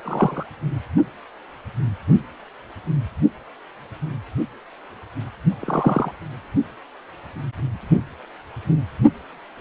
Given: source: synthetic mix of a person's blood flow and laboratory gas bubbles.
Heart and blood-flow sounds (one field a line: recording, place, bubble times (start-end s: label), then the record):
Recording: Doppler ultrasound of blood flow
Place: precordium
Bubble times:
0.02-0.46 s: bubbles
5.60-6.11 s: bubbles
From the record:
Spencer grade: 2 (many but less than half of the cardiac periods contain bubble signals, singularly or in groups)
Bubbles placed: only in the low amplitude regions of the cardiac cycle